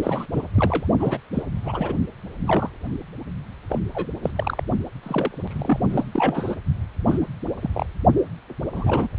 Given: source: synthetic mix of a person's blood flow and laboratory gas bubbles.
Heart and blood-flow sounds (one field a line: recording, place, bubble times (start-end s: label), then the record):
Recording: Doppler ultrasound of blood flow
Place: precordium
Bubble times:
0.02-0.26 s: bubbles
0.32-0.45 s: bubbles
0.54-0.86 s: bubbles
1.00-1.18 s: bubbles
1.33-1.43 s: bubbles
1.64-1.94 s: bubbles
2.46-2.70 s: bubbles
3.70-3.78 s: bubbles
3.94-4.07 s: bubbles
4.23-4.31 s: bubbles
4.36-4.64 s: bubbles
5.03-5.80 s: bubbles
5.90-6.08 s: bubbles
6.12-6.55 s: bubbles
7.07-7.17 s: bubbles
7.21-7.25 s: bubbles
7.61-7.71 s: bubbles
7.73-7.85 s: bubbles
8.74-9.08 s: bubbles
From the record:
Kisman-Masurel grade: 242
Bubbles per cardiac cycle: several, 3 to 8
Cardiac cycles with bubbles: 100%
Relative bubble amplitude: moderate (0.250 to 0.450)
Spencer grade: 3 (all of the cardiac periods contain showers or single bubble signals, but not dominating or overriding the cardiac motion signals)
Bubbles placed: only in the low amplitude regions of the cardiac cycle